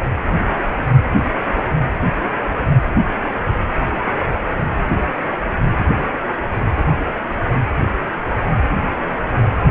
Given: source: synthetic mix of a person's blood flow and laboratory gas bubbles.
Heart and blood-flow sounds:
Doppler ultrasound of blood flow; precordium
0.77-0.83 s: bubbles
From the record:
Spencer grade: 1 (occasional bubble signal discernible with the cardiac motion signal, with majority of cardiac periods free of bubbles); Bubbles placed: anywhere in the cardiac cycle

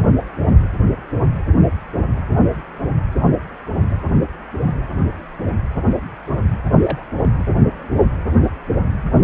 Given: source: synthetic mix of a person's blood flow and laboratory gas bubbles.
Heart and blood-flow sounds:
Doppler ultrasound of blood flow; precordium
6.79-7.07 s: bubbles
7.17-7.43 s: bubbles
From the record:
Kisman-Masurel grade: 111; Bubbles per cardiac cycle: 1 to 2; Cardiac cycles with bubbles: 1 to 10%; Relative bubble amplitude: barely perceptible (0.100 to 0.250); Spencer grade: 1 (occasional bubble signal discernible with the cardiac motion signal, with majority of cardiac periods free of bubbles); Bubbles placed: anywhere in the cardiac cycle

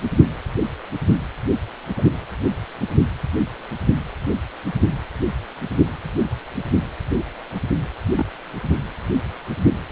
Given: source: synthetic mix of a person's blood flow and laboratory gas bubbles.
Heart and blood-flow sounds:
Doppler ultrasound of blood flow; precordium
1.96-2.04 s: bubbles
8.15-8.26 s: bubbles
From the record:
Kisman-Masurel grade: 121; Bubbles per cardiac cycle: 1 to 2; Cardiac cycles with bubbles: 10 to 50%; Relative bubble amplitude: barely perceptible (0.100 to 0.250); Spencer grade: 2 (many but less than half of the cardiac periods contain bubble signals, singularly or in groups); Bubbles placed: anywhere in the cardiac cycle

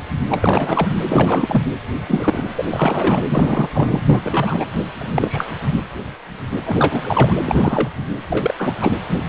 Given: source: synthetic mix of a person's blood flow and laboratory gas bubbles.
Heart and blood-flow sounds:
Doppler ultrasound of blood flow; precordium
0.29-0.97 s: bubbles
1.05-1.62 s: bubbles
2.06-2.45 s: bubbles
2.57-2.63 s: bubbles
2.71-3.23 s: bubbles
3.29-3.70 s: bubbles
3.74-4.00 s: bubbles
4.08-4.19 s: bubbles
4.22-4.66 s: bubbles
4.98-5.46 s: bubbles
6.64-7.34 s: bubbles
7.45-7.89 s: bubbles
8.30-8.54 s: bubbles
8.57-8.73 s: bubbles
8.81-8.92 s: bubbles
9.07-9.22 s: bubbles
From the record:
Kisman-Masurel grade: 233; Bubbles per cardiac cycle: several, 3 to 8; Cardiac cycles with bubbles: 50 to 99%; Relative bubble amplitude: loud (0.450 to 0.775); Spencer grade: 3 (all of the cardiac periods contain showers or single bubble signals, but not dominating or overriding the cardiac motion signals); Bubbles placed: anywhere in the cardiac cycle

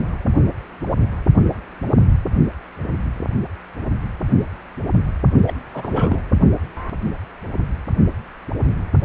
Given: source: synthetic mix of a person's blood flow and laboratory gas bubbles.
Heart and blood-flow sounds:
Doppler ultrasound of blood flow; precordium
5.47-5.53 s: bubbles
5.74-6.21 s: bubbles
From the record:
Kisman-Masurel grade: 212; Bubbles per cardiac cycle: several, 3 to 8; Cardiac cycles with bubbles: 1 to 10%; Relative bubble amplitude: moderate (0.250 to 0.450); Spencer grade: 1 (occasional bubble signal discernible with the cardiac motion signal, with majority of cardiac periods free of bubbles); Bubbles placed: only in the low amplitude regions of the cardiac cycle

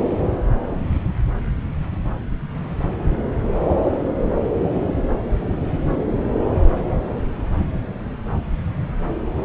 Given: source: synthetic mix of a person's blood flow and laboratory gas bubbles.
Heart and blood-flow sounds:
Doppler ultrasound of blood flow; subclavian vein
no bubbles
From the record:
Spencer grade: 0 (complete lack of bubble signals)

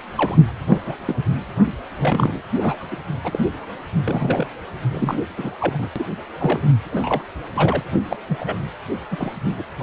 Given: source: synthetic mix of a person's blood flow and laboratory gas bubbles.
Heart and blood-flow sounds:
Doppler ultrasound of blood flow; precordium
0.16-0.51 s: bubbles
0.67-0.95 s: bubbles
1.05-1.16 s: bubbles
1.97-2.42 s: bubbles
2.55-2.85 s: bubbles
2.91-2.98 s: bubbles
3.24-3.67 s: bubbles
3.99-4.47 s: bubbles
4.91-5.19 s: bubbles
5.37-5.50 s: bubbles
5.60-5.90 s: bubbles
5.96-6.04 s: bubbles
6.40-6.60 s: bubbles
6.92-7.24 s: bubbles
7.54-7.83 s: bubbles
8.07-8.16 s: bubbles
8.28-8.57 s: bubbles
9.11-9.31 s: bubbles
9.57-9.63 s: bubbles
9.79-9.83 s: bubbles
From the record:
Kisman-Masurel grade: 242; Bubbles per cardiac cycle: several, 3 to 8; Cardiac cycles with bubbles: 100%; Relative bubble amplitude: moderate (0.250 to 0.450); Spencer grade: 3 (all of the cardiac periods contain showers or single bubble signals, but not dominating or overriding the cardiac motion signals); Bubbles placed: anywhere in the cardiac cycle

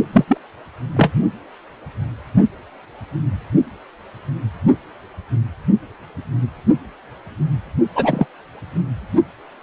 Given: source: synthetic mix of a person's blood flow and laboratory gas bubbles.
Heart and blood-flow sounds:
Doppler ultrasound of blood flow; precordium
0.12-0.24 s: bubbles
0.28-0.38 s: bubbles
0.96-1.11 s: bubbles
7.95-8.26 s: bubbles
From the record:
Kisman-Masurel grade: 223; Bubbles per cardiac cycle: several, 3 to 8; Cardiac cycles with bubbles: 10 to 50%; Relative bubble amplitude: loud (0.450 to 0.775); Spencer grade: 2 (many but less than half of the cardiac periods contain bubble signals, singularly or in groups); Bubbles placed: only in the low amplitude regions of the cardiac cycle

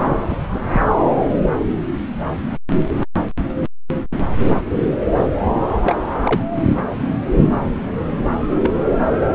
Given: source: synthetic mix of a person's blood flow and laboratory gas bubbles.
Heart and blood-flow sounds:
Doppler ultrasound of blood flow; subclavian vein
0.29-0.38 s: bubbles
0.54-0.60 s: bubbles
0.71-0.82 s: bubbles
5.84-5.97 s: bubbles
6.26-6.41 s: bubbles
8.62-8.71 s: bubbles
From the record:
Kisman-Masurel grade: 122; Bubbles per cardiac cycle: 1 to 2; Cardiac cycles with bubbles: 10 to 50%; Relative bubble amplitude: moderate (0.250 to 0.450); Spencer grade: 2 (many but less than half of the cardiac periods contain bubble signals, singularly or in groups); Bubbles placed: anywhere in the cardiac cycle

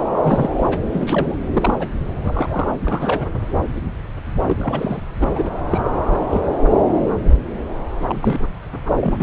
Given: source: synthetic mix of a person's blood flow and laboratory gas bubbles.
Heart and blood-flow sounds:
Doppler ultrasound of blood flow; subclavian vein
0.24-0.50 s: bubbles
0.56-0.78 s: bubbles
0.92-1.36 s: bubbles
1.54-1.88 s: bubbles
2.24-2.68 s: bubbles
2.81-3.28 s: bubbles
4.46-5.04 s: bubbles
5.20-5.54 s: bubbles
5.70-5.82 s: bubbles
6.11-6.19 s: bubbles
6.30-6.42 s: bubbles
8.07-8.47 s: bubbles
8.96-9.12 s: bubbles
9.20-9.23 s: bubbles
From the record:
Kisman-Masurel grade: 232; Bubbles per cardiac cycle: several, 3 to 8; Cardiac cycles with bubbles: 50 to 99%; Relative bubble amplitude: moderate (0.250 to 0.450); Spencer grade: 3 (all of the cardiac periods contain showers or single bubble signals, but not dominating or overriding the cardiac motion signals); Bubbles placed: anywhere in the cardiac cycle

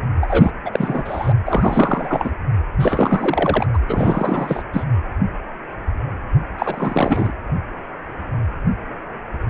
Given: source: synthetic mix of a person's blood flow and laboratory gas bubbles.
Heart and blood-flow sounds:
Doppler ultrasound of blood flow; precordium
0.21-0.52 s: bubbles
0.65-1.32 s: bubbles
1.46-2.31 s: bubbles
2.79-3.67 s: bubbles
3.73-3.79 s: bubbles
3.88-4.63 s: bubbles
4.73-4.84 s: bubbles
6.58-7.33 s: bubbles
From the record:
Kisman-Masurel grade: 333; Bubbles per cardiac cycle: rolling drumbeat, 9 or more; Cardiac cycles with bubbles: 50 to 99%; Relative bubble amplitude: loud (0.450 to 0.775); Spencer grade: 3 (all of the cardiac periods contain showers or single bubble signals, but not dominating or overriding the cardiac motion signals); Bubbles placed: anywhere in the cardiac cycle

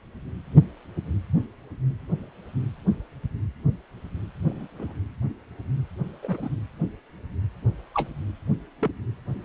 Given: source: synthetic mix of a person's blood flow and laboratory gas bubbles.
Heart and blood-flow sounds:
Doppler ultrasound of blood flow; precordium
4.44-4.67 s: bubbles
4.79-4.93 s: bubbles
6.22-6.49 s: bubbles
7.94-8.09 s: bubbles
8.80-8.91 s: bubbles
From the record:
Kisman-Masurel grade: 121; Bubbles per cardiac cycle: 1 to 2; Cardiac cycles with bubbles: 10 to 50%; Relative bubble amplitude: barely perceptible (0.100 to 0.250); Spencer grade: 2 (many but less than half of the cardiac periods contain bubble signals, singularly or in groups); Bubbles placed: anywhere in the cardiac cycle

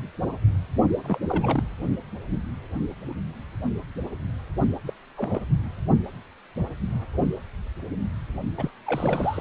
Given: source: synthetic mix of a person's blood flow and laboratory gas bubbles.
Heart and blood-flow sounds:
Doppler ultrasound of blood flow; precordium
1.04-1.19 s: bubbles
1.29-1.64 s: bubbles
4.87-4.94 s: bubbles
5.17-5.41 s: bubbles
8.57-8.71 s: bubbles
8.86-9.41 s: bubbles
From the record:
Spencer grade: 2 (many but less than half of the cardiac periods contain bubble signals, singularly or in groups); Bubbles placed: only in the low amplitude regions of the cardiac cycle

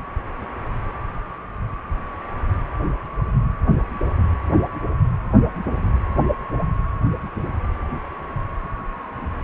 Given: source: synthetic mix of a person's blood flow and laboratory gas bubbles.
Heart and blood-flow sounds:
Doppler ultrasound of blood flow; precordium
no bubbles
From the record:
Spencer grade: 0 (complete lack of bubble signals)

